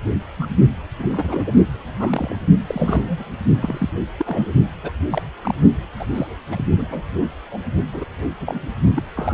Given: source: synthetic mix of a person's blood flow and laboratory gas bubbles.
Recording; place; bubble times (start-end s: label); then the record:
Doppler ultrasound of blood flow; precordium
0.36-0.46 s: bubbles
0.98-1.52 s: bubbles
1.55-1.63 s: bubbles
1.79-2.36 s: bubbles
2.67-3.25 s: bubbles
3.62-3.89 s: bubbles
4.18-4.53 s: bubbles
4.83-4.92 s: bubbles
5.10-5.22 s: bubbles
5.42-5.54 s: bubbles
5.99-6.07 s: bubbles
6.14-6.27 s: bubbles
6.51-6.65 s: bubbles
6.78-6.85 s: bubbles
6.89-7.02 s: bubbles
7.13-7.29 s: bubbles
7.51-7.59 s: bubbles
7.92-8.05 s: bubbles
8.19-8.28 s: bubbles
8.40-8.66 s: bubbles
8.96-9.03 s: bubbles
9.15-9.34 s: bubbles
From the record:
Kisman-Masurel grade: 232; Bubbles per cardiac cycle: several, 3 to 8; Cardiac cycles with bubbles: 50 to 99%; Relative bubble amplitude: moderate (0.250 to 0.450); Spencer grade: 3 (all of the cardiac periods contain showers or single bubble signals, but not dominating or overriding the cardiac motion signals); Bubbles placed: only in the low amplitude regions of the cardiac cycle